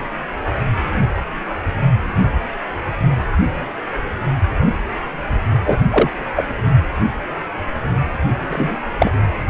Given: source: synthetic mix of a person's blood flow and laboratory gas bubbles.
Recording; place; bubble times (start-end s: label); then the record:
Doppler ultrasound of blood flow; precordium
5.65-5.78 s: bubbles
5.90-6.11 s: bubbles
6.35-6.45 s: bubbles
8.50-8.76 s: bubbles
8.99-9.13 s: bubbles
From the record:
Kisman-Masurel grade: 223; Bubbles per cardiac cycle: several, 3 to 8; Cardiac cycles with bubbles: 10 to 50%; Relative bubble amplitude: loud (0.450 to 0.775); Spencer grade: 2 (many but less than half of the cardiac periods contain bubble signals, singularly or in groups); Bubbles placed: anywhere in the cardiac cycle